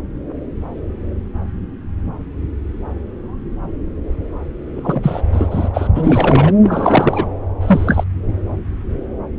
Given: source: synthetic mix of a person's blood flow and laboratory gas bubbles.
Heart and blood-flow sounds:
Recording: Doppler ultrasound of blood flow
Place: subclavian vein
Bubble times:
4.75-5.21 s: bubbles
5.32-5.69 s: bubbles
5.74-5.88 s: bubbles
5.95-6.52 s: bubbles
6.63-7.26 s: bubbles
7.61-8.04 s: bubbles
From the record:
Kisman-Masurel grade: 223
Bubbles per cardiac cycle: several, 3 to 8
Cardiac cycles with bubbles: 10 to 50%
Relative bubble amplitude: loud (0.450 to 0.775)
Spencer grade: 2 (many but less than half of the cardiac periods contain bubble signals, singularly or in groups)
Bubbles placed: anywhere in the cardiac cycle

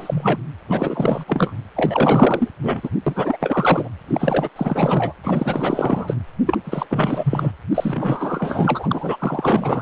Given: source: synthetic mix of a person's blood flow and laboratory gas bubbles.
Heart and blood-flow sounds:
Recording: Doppler ultrasound of blood flow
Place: precordium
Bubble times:
0.00-0.41 s: bubbles
0.68-1.24 s: bubbles
1.27-1.54 s: bubbles
1.76-2.51 s: bubbles
2.62-2.90 s: bubbles
3.06-3.37 s: bubbles
3.40-3.89 s: bubbles
4.08-4.49 s: bubbles
4.56-5.13 s: bubbles
5.24-6.16 s: bubbles
6.46-6.58 s: bubbles
6.64-6.86 s: bubbles
6.90-7.51 s: bubbles
7.74-9.82 s: bubbles
From the record:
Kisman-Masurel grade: 444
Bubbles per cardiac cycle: continuous sound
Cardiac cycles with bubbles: 100%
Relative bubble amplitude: maximal (0.775 to 0.999)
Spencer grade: 4 (maximum detectable bubble signal sounding continuously throughout systole and diastole of every cardiac period, and overriding the amplitude of the normal cardiac signals)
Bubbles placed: anywhere in the cardiac cycle

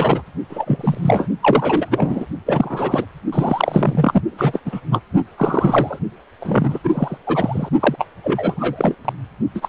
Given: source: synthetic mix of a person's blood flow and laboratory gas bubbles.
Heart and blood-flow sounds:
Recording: Doppler ultrasound of blood flow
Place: precordium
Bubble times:
0.00-0.22 s: bubbles
0.49-1.28 s: bubbles
1.42-2.25 s: bubbles
2.46-3.05 s: bubbles
3.32-4.21 s: bubbles
4.30-4.59 s: bubbles
4.65-4.81 s: bubbles
4.90-5.00 s: bubbles
5.38-5.99 s: bubbles
6.40-6.79 s: bubbles
6.83-7.18 s: bubbles
7.26-7.69 s: bubbles
7.79-8.06 s: bubbles
8.24-8.96 s: bubbles
9.04-9.13 s: bubbles
9.54-9.69 s: bubbles
From the record:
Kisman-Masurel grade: 343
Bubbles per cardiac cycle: rolling drumbeat, 9 or more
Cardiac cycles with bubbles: 100%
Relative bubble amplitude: loud (0.450 to 0.775)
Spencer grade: 3 (all of the cardiac periods contain showers or single bubble signals, but not dominating or overriding the cardiac motion signals)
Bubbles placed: only in the low amplitude regions of the cardiac cycle

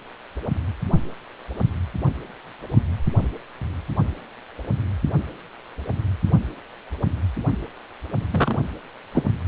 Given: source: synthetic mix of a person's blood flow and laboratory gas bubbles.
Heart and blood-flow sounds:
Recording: Doppler ultrasound of blood flow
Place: precordium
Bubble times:
8.31-8.59 s: bubbles
9.12-9.23 s: bubbles
From the record:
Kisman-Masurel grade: 112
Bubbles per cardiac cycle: 1 to 2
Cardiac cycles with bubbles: 1 to 10%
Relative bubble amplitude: moderate (0.250 to 0.450)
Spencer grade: 1 (occasional bubble signal discernible with the cardiac motion signal, with majority of cardiac periods free of bubbles)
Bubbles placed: only in the low amplitude regions of the cardiac cycle

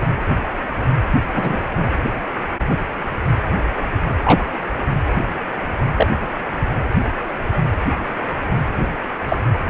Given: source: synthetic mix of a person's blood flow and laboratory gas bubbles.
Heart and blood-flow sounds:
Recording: Doppler ultrasound of blood flow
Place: precordium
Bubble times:
0.00-0.04 s: bubbles
1.33-1.60 s: bubbles
1.77-1.83 s: bubbles
4.24-4.47 s: bubbles
5.96-6.07 s: bubbles
9.29-9.37 s: bubbles
9.68-9.70 s: bubbles
From the record:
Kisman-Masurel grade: 123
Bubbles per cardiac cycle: 1 to 2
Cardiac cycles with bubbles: 10 to 50%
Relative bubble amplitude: loud (0.450 to 0.775)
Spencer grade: 2 (many but less than half of the cardiac periods contain bubble signals, singularly or in groups)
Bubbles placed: anywhere in the cardiac cycle

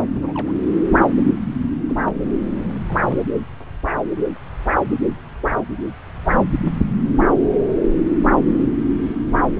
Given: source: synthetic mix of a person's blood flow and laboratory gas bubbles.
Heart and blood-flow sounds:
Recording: Doppler ultrasound of blood flow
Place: subclavian vein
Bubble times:
0.13-0.52 s: bubbles
1.89-1.96 s: bubbles
2.06-2.13 s: bubbles
2.85-3.19 s: bubbles
4.16-4.23 s: bubbles
From the record:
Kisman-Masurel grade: 121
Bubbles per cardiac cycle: 1 to 2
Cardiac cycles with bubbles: 10 to 50%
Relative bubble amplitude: barely perceptible (0.100 to 0.250)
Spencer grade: 2 (many but less than half of the cardiac periods contain bubble signals, singularly or in groups)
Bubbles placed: anywhere in the cardiac cycle

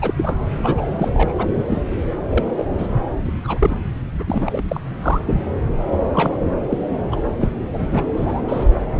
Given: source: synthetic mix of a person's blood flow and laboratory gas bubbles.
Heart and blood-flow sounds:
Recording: Doppler ultrasound of blood flow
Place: subclavian vein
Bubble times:
0.02-0.14 s: bubbles
0.17-0.36 s: bubbles
0.57-1.33 s: bubbles
1.38-1.84 s: bubbles
2.30-2.43 s: bubbles
2.56-2.66 s: bubbles
2.78-2.88 s: bubbles
3.24-3.33 s: bubbles
3.43-3.75 s: bubbles
4.19-4.24 s: bubbles
4.27-4.62 s: bubbles
4.68-4.80 s: bubbles
5.02-5.21 s: bubbles
5.25-5.41 s: bubbles
6.03-6.38 s: bubbles
6.69-6.79 s: bubbles
7.12-7.20 s: bubbles
7.40-7.49 s: bubbles
7.73-7.88 s: bubbles
7.91-8.03 s: bubbles
8.14-8.41 s: bubbles
8.48-8.67 s: bubbles
From the record:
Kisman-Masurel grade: 243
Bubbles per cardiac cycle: several, 3 to 8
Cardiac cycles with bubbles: 100%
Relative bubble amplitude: loud (0.450 to 0.775)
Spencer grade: 3 (all of the cardiac periods contain showers or single bubble signals, but not dominating or overriding the cardiac motion signals)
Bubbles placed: anywhere in the cardiac cycle

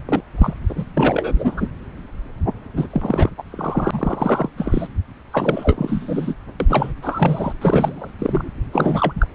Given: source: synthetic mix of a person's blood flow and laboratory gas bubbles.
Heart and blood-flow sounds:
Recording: Doppler ultrasound of blood flow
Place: subclavian vein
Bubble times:
0.06-0.21 s: bubbles
0.38-0.54 s: bubbles
0.68-0.86 s: bubbles
0.97-1.68 s: bubbles
2.75-3.29 s: bubbles
3.38-3.43 s: bubbles
3.50-4.50 s: bubbles
4.57-4.88 s: bubbles
5.32-6.34 s: bubbles
6.60-6.66 s: bubbles
6.69-6.92 s: bubbles
7.02-7.53 s: bubbles
7.61-8.10 s: bubbles
8.18-8.49 s: bubbles
8.72-9.13 s: bubbles
9.16-9.27 s: bubbles
From the record:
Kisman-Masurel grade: 333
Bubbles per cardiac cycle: rolling drumbeat, 9 or more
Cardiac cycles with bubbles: 50 to 99%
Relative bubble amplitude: loud (0.450 to 0.775)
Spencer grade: 3 (all of the cardiac periods contain showers or single bubble signals, but not dominating or overriding the cardiac motion signals)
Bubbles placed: anywhere in the cardiac cycle

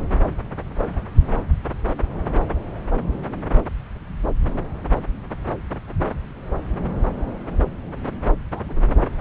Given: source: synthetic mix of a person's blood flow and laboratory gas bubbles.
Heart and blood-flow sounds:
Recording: Doppler ultrasound of blood flow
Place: subclavian vein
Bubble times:
8.53-8.80 s: bubbles
From the record:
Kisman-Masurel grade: 111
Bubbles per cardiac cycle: 1 to 2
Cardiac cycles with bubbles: 1 to 10%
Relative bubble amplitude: barely perceptible (0.100 to 0.250)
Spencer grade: 1 (occasional bubble signal discernible with the cardiac motion signal, with majority of cardiac periods free of bubbles)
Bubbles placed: anywhere in the cardiac cycle

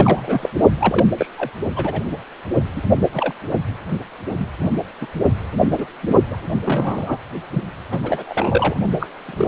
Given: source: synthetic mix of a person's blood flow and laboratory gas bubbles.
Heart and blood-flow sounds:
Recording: Doppler ultrasound of blood flow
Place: precordium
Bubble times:
0.00-0.49 s: bubbles
0.78-1.06 s: bubbles
1.18-1.27 s: bubbles
1.38-1.50 s: bubbles
1.76-2.01 s: bubbles
2.75-2.81 s: bubbles
3.13-3.33 s: bubbles
4.38-4.47 s: bubbles
4.58-4.76 s: bubbles
5.01-5.07 s: bubbles
5.59-5.67 s: bubbles
5.78-5.85 s: bubbles
6.03-6.11 s: bubbles
6.30-6.37 s: bubbles
6.64-7.18 s: bubbles
7.51-7.63 s: bubbles
7.91-8.24 s: bubbles
8.27-8.76 s: bubbles
8.99-9.07 s: bubbles
9.28-9.48 s: bubbles
From the record:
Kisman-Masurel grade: 232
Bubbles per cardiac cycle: several, 3 to 8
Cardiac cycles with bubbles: 50 to 99%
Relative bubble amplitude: moderate (0.250 to 0.450)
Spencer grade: 3 (all of the cardiac periods contain showers or single bubble signals, but not dominating or overriding the cardiac motion signals)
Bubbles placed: only in the low amplitude regions of the cardiac cycle

